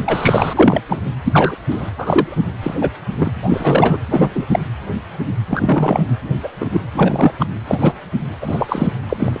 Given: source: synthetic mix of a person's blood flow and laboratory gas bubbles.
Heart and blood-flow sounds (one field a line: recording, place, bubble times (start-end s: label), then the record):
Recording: Doppler ultrasound of blood flow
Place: precordium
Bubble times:
0.00-0.02 s: bubbles
0.06-0.80 s: bubbles
0.88-0.98 s: bubbles
1.24-1.55 s: bubbles
1.70-1.90 s: bubbles
1.98-2.41 s: bubbles
2.62-2.75 s: bubbles
2.81-2.90 s: bubbles
3.18-3.31 s: bubbles
3.42-3.98 s: bubbles
4.11-4.29 s: bubbles
4.35-4.45 s: bubbles
4.51-4.60 s: bubbles
5.47-6.04 s: bubbles
6.43-6.49 s: bubbles
6.60-6.81 s: bubbles
6.95-7.33 s: bubbles
7.39-7.46 s: bubbles
7.67-8.00 s: bubbles
8.41-8.90 s: bubbles
9.09-9.40 s: bubbles
From the record:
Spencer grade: 3 (all of the cardiac periods contain showers or single bubble signals, but not dominating or overriding the cardiac motion signals)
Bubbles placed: anywhere in the cardiac cycle